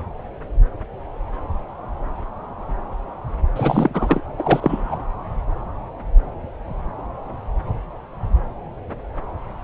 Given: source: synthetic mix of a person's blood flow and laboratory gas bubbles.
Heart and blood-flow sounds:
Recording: Doppler ultrasound of blood flow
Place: subclavian vein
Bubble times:
3.55-4.21 s: bubbles
4.38-4.99 s: bubbles
From the record:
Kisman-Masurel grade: 213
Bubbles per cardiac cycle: several, 3 to 8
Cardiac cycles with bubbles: 1 to 10%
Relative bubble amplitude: loud (0.450 to 0.775)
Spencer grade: 1 (occasional bubble signal discernible with the cardiac motion signal, with majority of cardiac periods free of bubbles)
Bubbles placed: anywhere in the cardiac cycle

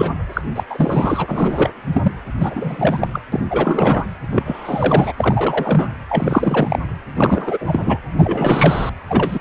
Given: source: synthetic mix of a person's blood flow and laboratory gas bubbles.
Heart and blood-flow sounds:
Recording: Doppler ultrasound of blood flow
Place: precordium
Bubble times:
0.00-0.11 s: bubbles
0.33-0.41 s: bubbles
0.55-0.63 s: bubbles
0.69-1.72 s: bubbles
1.94-2.12 s: bubbles
2.40-3.08 s: bubbles
3.12-3.22 s: bubbles
3.32-3.45 s: bubbles
3.50-4.06 s: bubbles
4.30-5.12 s: bubbles
5.17-5.89 s: bubbles
6.09-6.79 s: bubbles
7.14-7.99 s: bubbles
8.18-8.89 s: bubbles
9.08-9.39 s: bubbles
From the record:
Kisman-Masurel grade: 343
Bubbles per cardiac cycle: rolling drumbeat, 9 or more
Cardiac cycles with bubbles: 100%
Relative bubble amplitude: loud (0.450 to 0.775)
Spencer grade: 3 (all of the cardiac periods contain showers or single bubble signals, but not dominating or overriding the cardiac motion signals)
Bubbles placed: anywhere in the cardiac cycle

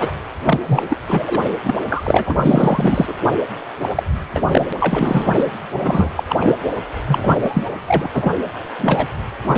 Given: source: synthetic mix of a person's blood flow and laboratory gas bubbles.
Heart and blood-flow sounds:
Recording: Doppler ultrasound of blood flow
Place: precordium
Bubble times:
0.00-0.13 s: bubbles
0.44-0.59 s: bubbles
0.67-0.82 s: bubbles
0.90-0.97 s: bubbles
1.09-1.49 s: bubbles
1.64-1.75 s: bubbles
1.89-3.15 s: bubbles
3.81-3.89 s: bubbles
3.95-4.03 s: bubbles
4.30-4.67 s: bubbles
4.70-4.73 s: bubbles
4.80-5.51 s: bubbles
5.81-6.09 s: bubbles
6.16-6.24 s: bubbles
6.29-6.36 s: bubbles
6.41-6.54 s: bubbles
7.07-7.36 s: bubbles
7.42-7.64 s: bubbles
7.88-8.09 s: bubbles
8.13-8.34 s: bubbles
8.64-8.69 s: bubbles
8.79-9.08 s: bubbles
9.43-9.58 s: bubbles
From the record:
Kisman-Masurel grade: 343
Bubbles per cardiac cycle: rolling drumbeat, 9 or more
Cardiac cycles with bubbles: 100%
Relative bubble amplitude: loud (0.450 to 0.775)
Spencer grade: 3 (all of the cardiac periods contain showers or single bubble signals, but not dominating or overriding the cardiac motion signals)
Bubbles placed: anywhere in the cardiac cycle

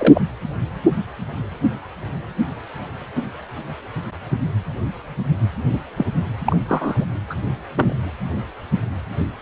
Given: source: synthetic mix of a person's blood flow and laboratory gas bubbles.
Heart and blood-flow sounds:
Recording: Doppler ultrasound of blood flow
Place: precordium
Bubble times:
0.00-0.21 s: bubbles
5.72-5.80 s: bubbles
5.97-6.06 s: bubbles
6.46-6.56 s: bubbles
6.68-7.04 s: bubbles
7.30-7.34 s: bubbles
7.74-7.95 s: bubbles
From the record:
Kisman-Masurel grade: 122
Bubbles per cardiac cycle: 1 to 2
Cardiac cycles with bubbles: 10 to 50%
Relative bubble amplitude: moderate (0.250 to 0.450)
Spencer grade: 2 (many but less than half of the cardiac periods contain bubble signals, singularly or in groups)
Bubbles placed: anywhere in the cardiac cycle

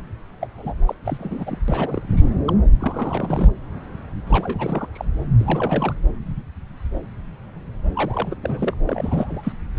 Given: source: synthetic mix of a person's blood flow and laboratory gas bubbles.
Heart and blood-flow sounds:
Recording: Doppler ultrasound of blood flow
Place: subclavian vein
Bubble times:
0.41-0.48 s: bubbles
0.57-0.73 s: bubbles
0.86-0.95 s: bubbles
1.05-1.58 s: bubbles
1.68-2.31 s: bubbles
2.46-2.54 s: bubbles
2.79-3.50 s: bubbles
4.27-4.87 s: bubbles
4.92-5.05 s: bubbles
5.39-5.93 s: bubbles
7.95-8.35 s: bubbles
8.42-8.74 s: bubbles
8.87-9.53 s: bubbles
From the record:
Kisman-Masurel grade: 332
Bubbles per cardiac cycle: rolling drumbeat, 9 or more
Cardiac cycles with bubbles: 50 to 99%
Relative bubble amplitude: moderate (0.250 to 0.450)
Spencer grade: 3 (all of the cardiac periods contain showers or single bubble signals, but not dominating or overriding the cardiac motion signals)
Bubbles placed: anywhere in the cardiac cycle

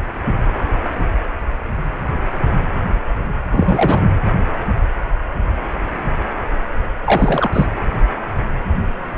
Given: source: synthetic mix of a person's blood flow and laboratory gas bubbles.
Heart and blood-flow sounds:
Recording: Doppler ultrasound of blood flow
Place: precordium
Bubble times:
3.51-4.02 s: bubbles
7.04-7.66 s: bubbles
From the record:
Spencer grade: 2 (many but less than half of the cardiac periods contain bubble signals, singularly or in groups)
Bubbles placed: anywhere in the cardiac cycle

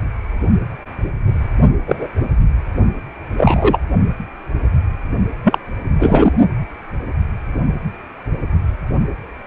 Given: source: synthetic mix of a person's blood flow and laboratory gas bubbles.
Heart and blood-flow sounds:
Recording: Doppler ultrasound of blood flow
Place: precordium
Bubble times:
1.86-2.08 s: bubbles
3.38-3.78 s: bubbles
5.44-5.58 s: bubbles
5.99-6.32 s: bubbles
From the record:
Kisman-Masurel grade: 223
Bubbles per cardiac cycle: several, 3 to 8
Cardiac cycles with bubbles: 10 to 50%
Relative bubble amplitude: loud (0.450 to 0.775)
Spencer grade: 2 (many but less than half of the cardiac periods contain bubble signals, singularly or in groups)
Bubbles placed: only in the low amplitude regions of the cardiac cycle

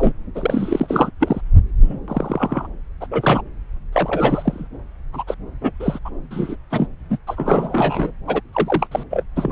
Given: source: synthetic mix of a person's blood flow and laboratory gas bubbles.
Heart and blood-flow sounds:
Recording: Doppler ultrasound of blood flow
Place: subclavian vein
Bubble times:
0.00-0.14 s: bubbles
0.35-1.10 s: bubbles
1.19-1.41 s: bubbles
1.82-1.99 s: bubbles
2.07-2.67 s: bubbles
3.00-3.06 s: bubbles
3.10-3.42 s: bubbles
3.93-4.67 s: bubbles
5.12-5.24 s: bubbles
5.27-5.35 s: bubbles
5.61-5.71 s: bubbles
5.79-5.99 s: bubbles
6.05-6.10 s: bubbles
6.31-6.57 s: bubbles
6.71-6.87 s: bubbles
7.10-7.17 s: bubbles
7.27-8.12 s: bubbles
8.27-8.41 s: bubbles
8.52-8.88 s: bubbles
8.91-9.04 s: bubbles
9.10-9.23 s: bubbles
9.36-9.52 s: bubbles
From the record:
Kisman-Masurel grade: 242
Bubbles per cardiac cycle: several, 3 to 8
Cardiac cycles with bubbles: 100%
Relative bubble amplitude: moderate (0.250 to 0.450)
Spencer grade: 3 (all of the cardiac periods contain showers or single bubble signals, but not dominating or overriding the cardiac motion signals)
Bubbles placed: anywhere in the cardiac cycle

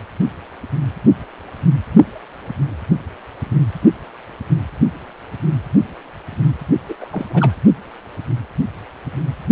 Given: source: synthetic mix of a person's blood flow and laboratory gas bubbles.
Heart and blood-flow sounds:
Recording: Doppler ultrasound of blood flow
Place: precordium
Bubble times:
6.88-6.94 s: bubbles
7.00-7.09 s: bubbles
7.12-7.25 s: bubbles
7.29-7.54 s: bubbles
From the record:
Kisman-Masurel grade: 212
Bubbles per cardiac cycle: several, 3 to 8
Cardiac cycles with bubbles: 1 to 10%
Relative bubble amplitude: moderate (0.250 to 0.450)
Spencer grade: 1 (occasional bubble signal discernible with the cardiac motion signal, with majority of cardiac periods free of bubbles)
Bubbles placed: only in the low amplitude regions of the cardiac cycle

